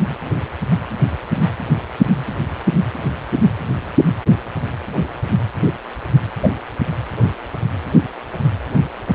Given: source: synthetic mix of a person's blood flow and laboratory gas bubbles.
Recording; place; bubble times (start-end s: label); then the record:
Doppler ultrasound of blood flow; precordium
6.43-6.49 s: bubbles
From the record:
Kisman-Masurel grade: 113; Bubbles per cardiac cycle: 1 to 2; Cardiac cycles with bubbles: 1 to 10%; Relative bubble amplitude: loud (0.450 to 0.775); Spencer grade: 1 (occasional bubble signal discernible with the cardiac motion signal, with majority of cardiac periods free of bubbles); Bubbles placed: anywhere in the cardiac cycle